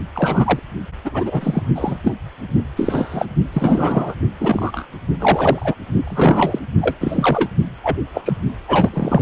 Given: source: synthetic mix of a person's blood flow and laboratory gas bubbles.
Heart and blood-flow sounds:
Doppler ultrasound of blood flow; precordium
0.15-0.59 s: bubbles
1.05-1.64 s: bubbles
1.74-1.99 s: bubbles
2.03-2.15 s: bubbles
2.76-3.25 s: bubbles
3.53-4.14 s: bubbles
4.40-4.87 s: bubbles
5.20-5.75 s: bubbles
6.04-6.59 s: bubbles
6.81-6.97 s: bubbles
7.00-7.50 s: bubbles
7.83-7.98 s: bubbles
8.13-8.21 s: bubbles
8.25-8.37 s: bubbles
8.68-8.89 s: bubbles
8.93-9.21 s: bubbles
From the record:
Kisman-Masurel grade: 243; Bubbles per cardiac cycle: several, 3 to 8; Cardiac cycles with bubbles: 100%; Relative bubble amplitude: loud (0.450 to 0.775); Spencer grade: 3 (all of the cardiac periods contain showers or single bubble signals, but not dominating or overriding the cardiac motion signals); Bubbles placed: only in the low amplitude regions of the cardiac cycle

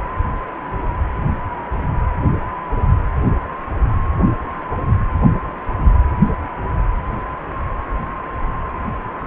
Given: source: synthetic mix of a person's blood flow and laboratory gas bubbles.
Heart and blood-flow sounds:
Doppler ultrasound of blood flow; precordium
no bubbles
From the record:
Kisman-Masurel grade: 000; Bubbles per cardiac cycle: 0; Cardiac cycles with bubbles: 0%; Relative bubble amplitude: no bubbles discernible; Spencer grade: 0 (complete lack of bubble signals)

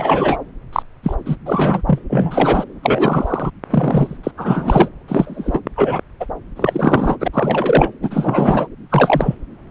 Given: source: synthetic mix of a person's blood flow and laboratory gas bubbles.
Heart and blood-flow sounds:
Doppler ultrasound of blood flow; subclavian vein
0.00-0.37 s: bubbles
0.72-0.83 s: bubbles
1.03-1.15 s: bubbles
1.25-1.35 s: bubbles
1.45-1.81 s: bubbles
1.87-1.99 s: bubbles
2.09-2.65 s: bubbles
2.83-3.51 s: bubbles
3.70-4.17 s: bubbles
4.23-4.31 s: bubbles
4.37-4.88 s: bubbles
5.08-5.60 s: bubbles
5.77-6.00 s: bubbles
6.20-6.25 s: bubbles
6.56-7.17 s: bubbles
7.20-7.28 s: bubbles
7.33-7.92 s: bubbles
8.02-8.68 s: bubbles
8.89-9.35 s: bubbles
From the record:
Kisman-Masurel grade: 233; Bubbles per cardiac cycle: several, 3 to 8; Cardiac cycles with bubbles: 50 to 99%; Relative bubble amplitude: loud (0.450 to 0.775); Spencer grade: 3 (all of the cardiac periods contain showers or single bubble signals, but not dominating or overriding the cardiac motion signals); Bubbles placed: anywhere in the cardiac cycle

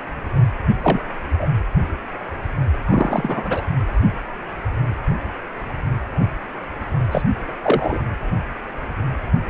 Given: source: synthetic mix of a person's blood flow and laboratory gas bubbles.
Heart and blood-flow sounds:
Doppler ultrasound of blood flow; precordium
0.82-1.01 s: bubbles
1.39-1.47 s: bubbles
2.86-3.62 s: bubbles
7.11-7.22 s: bubbles
7.62-7.99 s: bubbles
From the record:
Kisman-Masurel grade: 222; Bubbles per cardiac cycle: several, 3 to 8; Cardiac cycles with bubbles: 10 to 50%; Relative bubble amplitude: moderate (0.250 to 0.450); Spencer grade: 2 (many but less than half of the cardiac periods contain bubble signals, singularly or in groups); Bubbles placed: anywhere in the cardiac cycle

